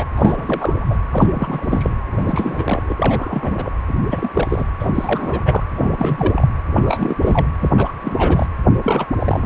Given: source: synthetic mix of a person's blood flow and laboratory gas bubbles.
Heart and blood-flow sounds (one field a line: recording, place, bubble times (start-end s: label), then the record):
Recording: Doppler ultrasound of blood flow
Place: precordium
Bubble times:
0.00-0.06 s: bubbles
0.16-0.97 s: bubbles
1.10-1.94 s: bubbles
2.10-3.72 s: bubbles
3.88-3.92 s: bubbles
4.10-4.65 s: bubbles
4.79-5.63 s: bubbles
5.75-6.48 s: bubbles
6.69-7.17 s: bubbles
7.21-7.46 s: bubbles
7.61-7.71 s: bubbles
7.77-7.92 s: bubbles
8.01-8.46 s: bubbles
8.83-9.06 s: bubbles
9.19-9.46 s: bubbles
From the record:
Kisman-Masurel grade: 342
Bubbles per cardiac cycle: rolling drumbeat, 9 or more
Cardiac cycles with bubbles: 100%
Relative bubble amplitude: moderate (0.250 to 0.450)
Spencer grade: 3 (all of the cardiac periods contain showers or single bubble signals, but not dominating or overriding the cardiac motion signals)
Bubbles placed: anywhere in the cardiac cycle